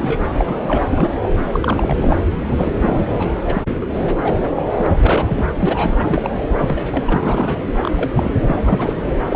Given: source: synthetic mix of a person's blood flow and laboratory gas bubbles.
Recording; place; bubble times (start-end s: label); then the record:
Doppler ultrasound of blood flow; subclavian vein
0.00-0.21 s: bubbles
0.37-0.82 s: bubbles
0.89-1.12 s: bubbles
1.23-1.29 s: bubbles
1.52-2.17 s: bubbles
2.40-2.74 s: bubbles
2.81-3.05 s: bubbles
3.11-3.29 s: bubbles
3.46-3.62 s: bubbles
3.81-3.87 s: bubbles
4.23-4.40 s: bubbles
4.56-4.62 s: bubbles
4.71-4.90 s: bubbles
5.04-5.46 s: bubbles
5.58-6.36 s: bubbles
6.56-7.20 s: bubbles
7.23-7.65 s: bubbles
7.82-8.10 s: bubbles
8.15-8.32 s: bubbles
8.44-8.93 s: bubbles
9.05-9.12 s: bubbles
9.29-9.36 s: bubbles
From the record:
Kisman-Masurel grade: 242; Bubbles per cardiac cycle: several, 3 to 8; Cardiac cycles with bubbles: 100%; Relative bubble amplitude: moderate (0.250 to 0.450); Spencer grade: 3 (all of the cardiac periods contain showers or single bubble signals, but not dominating or overriding the cardiac motion signals); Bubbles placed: anywhere in the cardiac cycle